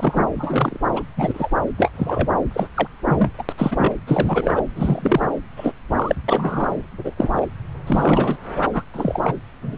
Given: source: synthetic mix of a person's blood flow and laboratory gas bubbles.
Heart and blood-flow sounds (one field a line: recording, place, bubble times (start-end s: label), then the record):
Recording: Doppler ultrasound of blood flow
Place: subclavian vein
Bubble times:
0.00-0.24 s: bubbles
0.34-0.78 s: bubbles
0.92-1.03 s: bubbles
1.17-1.48 s: bubbles
1.77-2.27 s: bubbles
2.54-2.69 s: bubbles
2.75-2.88 s: bubbles
3.08-3.33 s: bubbles
3.38-3.44 s: bubbles
3.48-3.52 s: bubbles
3.58-3.92 s: bubbles
4.07-4.62 s: bubbles
4.75-5.26 s: bubbles
5.56-5.73 s: bubbles
5.96-6.16 s: bubbles
6.28-6.80 s: bubbles
7.04-7.12 s: bubbles
7.17-7.46 s: bubbles
7.87-8.37 s: bubbles
8.64-8.69 s: bubbles
8.73-8.84 s: bubbles
8.93-9.34 s: bubbles
9.62-9.77 s: bubbles
From the record:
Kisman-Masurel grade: 243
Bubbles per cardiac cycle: several, 3 to 8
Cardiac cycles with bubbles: 100%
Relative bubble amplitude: loud (0.450 to 0.775)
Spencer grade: 3 (all of the cardiac periods contain showers or single bubble signals, but not dominating or overriding the cardiac motion signals)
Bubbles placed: anywhere in the cardiac cycle